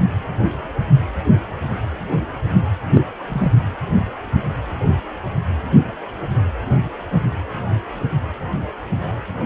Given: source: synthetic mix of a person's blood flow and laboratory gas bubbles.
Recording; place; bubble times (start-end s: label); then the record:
Doppler ultrasound of blood flow; precordium
2.94-3.01 s: bubbles
3.29-3.52 s: bubbles
From the record:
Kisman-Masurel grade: 112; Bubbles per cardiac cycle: 1 to 2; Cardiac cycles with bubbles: 1 to 10%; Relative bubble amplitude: moderate (0.250 to 0.450); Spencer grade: 1 (occasional bubble signal discernible with the cardiac motion signal, with majority of cardiac periods free of bubbles); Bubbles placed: anywhere in the cardiac cycle